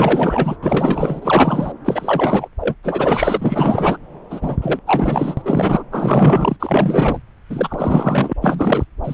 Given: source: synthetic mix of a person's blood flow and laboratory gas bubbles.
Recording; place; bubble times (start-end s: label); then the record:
Doppler ultrasound of blood flow; subclavian vein
0.00-0.56 s: bubbles
0.62-1.19 s: bubbles
1.22-1.72 s: bubbles
1.85-2.48 s: bubbles
2.60-2.75 s: bubbles
2.83-3.97 s: bubbles
4.30-4.57 s: bubbles
4.61-4.79 s: bubbles
4.86-5.42 s: bubbles
5.45-5.83 s: bubbles
5.92-6.56 s: bubbles
6.59-7.19 s: bubbles
7.49-8.33 s: bubbles
8.41-8.84 s: bubbles
9.04-9.14 s: bubbles
From the record:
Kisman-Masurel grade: 444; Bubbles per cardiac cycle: continuous sound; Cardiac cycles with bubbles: 100%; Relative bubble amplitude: maximal (0.775 to 0.999); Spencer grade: 4 (maximum detectable bubble signal sounding continuously throughout systole and diastole of every cardiac period, and overriding the amplitude of the normal cardiac signals); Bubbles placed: anywhere in the cardiac cycle